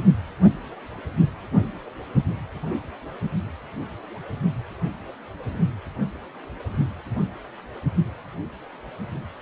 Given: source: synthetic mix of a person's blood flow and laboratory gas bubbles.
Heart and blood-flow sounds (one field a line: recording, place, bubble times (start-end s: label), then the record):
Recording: Doppler ultrasound of blood flow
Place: precordium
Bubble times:
no bubbles
From the record:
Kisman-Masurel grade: 000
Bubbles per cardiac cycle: 0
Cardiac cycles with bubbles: 0%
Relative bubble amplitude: no bubbles discernible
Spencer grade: 0 (complete lack of bubble signals)